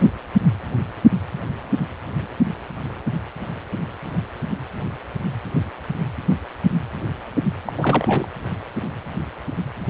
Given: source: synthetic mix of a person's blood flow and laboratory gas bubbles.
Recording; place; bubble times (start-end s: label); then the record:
Doppler ultrasound of blood flow; precordium
7.65-7.72 s: bubbles
7.76-8.28 s: bubbles
From the record:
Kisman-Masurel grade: 212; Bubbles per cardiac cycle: several, 3 to 8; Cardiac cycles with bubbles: 1 to 10%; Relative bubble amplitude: moderate (0.250 to 0.450); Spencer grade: 1 (occasional bubble signal discernible with the cardiac motion signal, with majority of cardiac periods free of bubbles); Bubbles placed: anywhere in the cardiac cycle